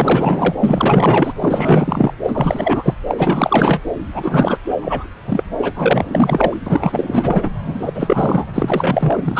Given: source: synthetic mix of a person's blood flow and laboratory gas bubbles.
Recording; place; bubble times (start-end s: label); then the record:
Doppler ultrasound of blood flow; subclavian vein
0.00-0.55 s: bubbles
0.59-1.33 s: bubbles
1.40-2.12 s: bubbles
2.24-2.95 s: bubbles
3.08-3.82 s: bubbles
4.14-4.60 s: bubbles
4.67-4.75 s: bubbles
4.81-5.09 s: bubbles
5.27-5.43 s: bubbles
5.58-5.73 s: bubbles
5.76-6.57 s: bubbles
6.66-7.50 s: bubbles
7.65-8.46 s: bubbles
8.53-9.39 s: bubbles
From the record:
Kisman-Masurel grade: 444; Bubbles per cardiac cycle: continuous sound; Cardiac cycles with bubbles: 100%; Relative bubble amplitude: maximal (0.775 to 0.999); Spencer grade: 4 (maximum detectable bubble signal sounding continuously throughout systole and diastole of every cardiac period, and overriding the amplitude of the normal cardiac signals); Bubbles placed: anywhere in the cardiac cycle